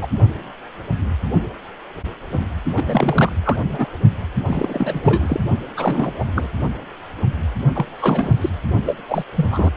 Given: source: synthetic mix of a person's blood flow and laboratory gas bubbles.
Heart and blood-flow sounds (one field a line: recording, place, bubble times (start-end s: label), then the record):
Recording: Doppler ultrasound of blood flow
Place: precordium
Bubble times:
0.00-0.07 s: bubbles
2.76-3.32 s: bubbles
3.44-3.57 s: bubbles
3.69-3.86 s: bubbles
4.46-5.40 s: bubbles
5.76-6.13 s: bubbles
6.18-6.25 s: bubbles
6.35-6.47 s: bubbles
7.74-7.85 s: bubbles
7.99-8.50 s: bubbles
8.86-8.98 s: bubbles
9.09-9.24 s: bubbles
9.36-9.47 s: bubbles
9.50-9.71 s: bubbles
From the record:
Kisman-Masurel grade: 332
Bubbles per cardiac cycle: rolling drumbeat, 9 or more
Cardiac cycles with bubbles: 50 to 99%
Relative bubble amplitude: moderate (0.250 to 0.450)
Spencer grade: 3 (all of the cardiac periods contain showers or single bubble signals, but not dominating or overriding the cardiac motion signals)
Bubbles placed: only in the low amplitude regions of the cardiac cycle